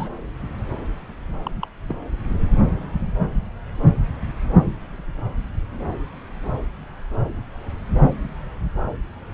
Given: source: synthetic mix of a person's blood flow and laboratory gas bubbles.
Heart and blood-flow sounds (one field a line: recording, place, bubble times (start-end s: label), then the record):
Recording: Doppler ultrasound of blood flow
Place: subclavian vein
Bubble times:
0.00-0.09 s: bubbles
1.44-1.51 s: bubbles
1.61-1.68 s: bubbles
1.89-1.96 s: bubbles
From the record:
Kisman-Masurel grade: 211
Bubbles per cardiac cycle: several, 3 to 8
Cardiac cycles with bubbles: 1 to 10%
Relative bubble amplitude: barely perceptible (0.100 to 0.250)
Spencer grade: 1 (occasional bubble signal discernible with the cardiac motion signal, with majority of cardiac periods free of bubbles)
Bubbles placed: anywhere in the cardiac cycle